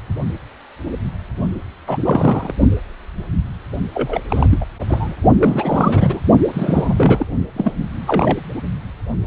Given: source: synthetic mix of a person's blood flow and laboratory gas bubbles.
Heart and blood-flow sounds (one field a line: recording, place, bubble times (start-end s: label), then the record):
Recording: Doppler ultrasound of blood flow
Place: precordium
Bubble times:
1.87-1.98 s: bubbles
2.04-2.52 s: bubbles
3.94-4.21 s: bubbles
4.29-4.65 s: bubbles
4.88-5.14 s: bubbles
5.38-6.21 s: bubbles
6.53-7.28 s: bubbles
7.56-7.71 s: bubbles
8.07-8.37 s: bubbles
From the record:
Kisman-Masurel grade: 333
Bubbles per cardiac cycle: rolling drumbeat, 9 or more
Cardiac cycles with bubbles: 50 to 99%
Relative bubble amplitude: loud (0.450 to 0.775)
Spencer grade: 3 (all of the cardiac periods contain showers or single bubble signals, but not dominating or overriding the cardiac motion signals)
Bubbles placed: only in the low amplitude regions of the cardiac cycle